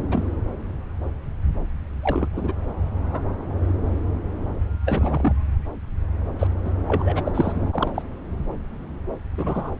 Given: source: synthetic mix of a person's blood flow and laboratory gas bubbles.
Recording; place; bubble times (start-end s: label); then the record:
Doppler ultrasound of blood flow; subclavian vein
0.00-0.04 s: bubbles
0.11-0.33 s: bubbles
2.02-2.29 s: bubbles
2.35-2.54 s: bubbles
3.04-3.23 s: bubbles
4.85-5.33 s: bubbles
6.39-6.47 s: bubbles
6.64-6.71 s: bubbles
6.88-7.22 s: bubbles
7.25-7.31 s: bubbles
7.34-7.52 s: bubbles
7.55-8.02 s: bubbles
9.38-9.71 s: bubbles
From the record:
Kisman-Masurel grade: 232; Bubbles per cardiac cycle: several, 3 to 8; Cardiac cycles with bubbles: 50 to 99%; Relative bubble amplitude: moderate (0.250 to 0.450); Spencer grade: 3 (all of the cardiac periods contain showers or single bubble signals, but not dominating or overriding the cardiac motion signals); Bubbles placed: anywhere in the cardiac cycle